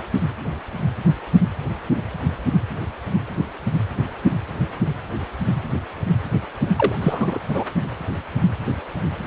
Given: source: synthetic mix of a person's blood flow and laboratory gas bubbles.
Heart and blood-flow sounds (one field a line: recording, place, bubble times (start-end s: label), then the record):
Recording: Doppler ultrasound of blood flow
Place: precordium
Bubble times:
6.76-6.96 s: bubbles
7.00-7.38 s: bubbles
7.49-7.64 s: bubbles
From the record:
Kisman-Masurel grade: 212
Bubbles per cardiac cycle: several, 3 to 8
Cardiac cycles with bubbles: 1 to 10%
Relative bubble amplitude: moderate (0.250 to 0.450)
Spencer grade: 1 (occasional bubble signal discernible with the cardiac motion signal, with majority of cardiac periods free of bubbles)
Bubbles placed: only in the low amplitude regions of the cardiac cycle